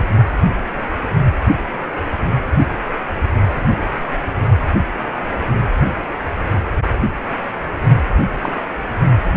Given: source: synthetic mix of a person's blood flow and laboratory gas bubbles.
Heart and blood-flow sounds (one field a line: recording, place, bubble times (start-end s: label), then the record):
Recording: Doppler ultrasound of blood flow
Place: precordium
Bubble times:
8.41-8.52 s: bubbles
From the record:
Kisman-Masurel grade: 113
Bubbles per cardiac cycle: 1 to 2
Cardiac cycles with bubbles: 1 to 10%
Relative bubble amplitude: loud (0.450 to 0.775)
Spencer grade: 1 (occasional bubble signal discernible with the cardiac motion signal, with majority of cardiac periods free of bubbles)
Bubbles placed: anywhere in the cardiac cycle